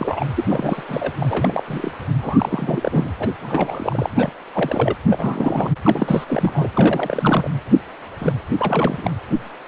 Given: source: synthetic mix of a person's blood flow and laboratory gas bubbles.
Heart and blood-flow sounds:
Doppler ultrasound of blood flow; precordium
0.00-0.26 s: bubbles
0.36-0.44 s: bubbles
0.49-0.82 s: bubbles
0.88-1.13 s: bubbles
1.20-1.63 s: bubbles
1.68-1.91 s: bubbles
2.21-3.10 s: bubbles
3.19-3.29 s: bubbles
3.40-4.30 s: bubbles
4.53-4.96 s: bubbles
5.09-5.74 s: bubbles
5.83-6.68 s: bubbles
6.73-7.48 s: bubbles
8.19-8.32 s: bubbles
8.57-9.11 s: bubbles
9.30-9.37 s: bubbles
From the record:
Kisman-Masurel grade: 332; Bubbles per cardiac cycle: rolling drumbeat, 9 or more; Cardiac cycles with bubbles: 50 to 99%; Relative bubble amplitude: moderate (0.250 to 0.450); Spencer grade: 3 (all of the cardiac periods contain showers or single bubble signals, but not dominating or overriding the cardiac motion signals); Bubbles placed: anywhere in the cardiac cycle

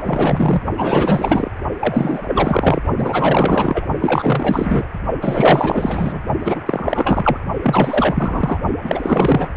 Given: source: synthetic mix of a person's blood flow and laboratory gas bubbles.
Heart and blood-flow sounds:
Doppler ultrasound of blood flow; precordium
0.00-0.62 s: bubbles
0.77-1.51 s: bubbles
1.79-2.23 s: bubbles
2.27-2.81 s: bubbles
2.97-3.85 s: bubbles
4.00-4.87 s: bubbles
5.21-6.21 s: bubbles
6.39-6.61 s: bubbles
6.66-7.38 s: bubbles
7.62-8.60 s: bubbles
8.83-9.49 s: bubbles
From the record:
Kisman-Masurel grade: 444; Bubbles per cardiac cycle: continuous sound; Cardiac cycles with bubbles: 100%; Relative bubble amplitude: maximal (0.775 to 0.999); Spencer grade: 4 (maximum detectable bubble signal sounding continuously throughout systole and diastole of every cardiac period, and overriding the amplitude of the normal cardiac signals); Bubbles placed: only in the low amplitude regions of the cardiac cycle

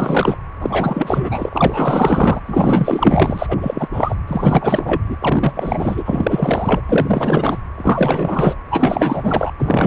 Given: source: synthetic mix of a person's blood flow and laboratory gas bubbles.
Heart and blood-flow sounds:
Doppler ultrasound of blood flow; precordium
0.00-0.38 s: bubbles
0.60-1.49 s: bubbles
1.52-2.42 s: bubbles
2.46-3.88 s: bubbles
3.92-4.16 s: bubbles
4.28-5.01 s: bubbles
5.09-5.17 s: bubbles
5.22-6.81 s: bubbles
6.88-7.58 s: bubbles
7.77-8.56 s: bubbles
8.71-9.52 s: bubbles
9.59-9.87 s: bubbles
From the record:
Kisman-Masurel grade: 444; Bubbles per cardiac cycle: continuous sound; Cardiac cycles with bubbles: 100%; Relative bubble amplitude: maximal (0.775 to 0.999); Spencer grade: 4 (maximum detectable bubble signal sounding continuously throughout systole and diastole of every cardiac period, and overriding the amplitude of the normal cardiac signals); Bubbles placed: anywhere in the cardiac cycle

